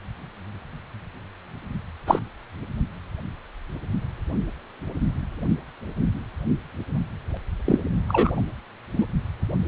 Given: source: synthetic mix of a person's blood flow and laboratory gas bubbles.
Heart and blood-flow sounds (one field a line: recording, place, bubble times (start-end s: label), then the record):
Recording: Doppler ultrasound of blood flow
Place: precordium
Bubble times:
2.06-2.19 s: bubbles
7.66-7.79 s: bubbles
8.09-8.41 s: bubbles
8.97-9.05 s: bubbles
From the record:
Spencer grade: 2 (many but less than half of the cardiac periods contain bubble signals, singularly or in groups)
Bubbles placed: only in the low amplitude regions of the cardiac cycle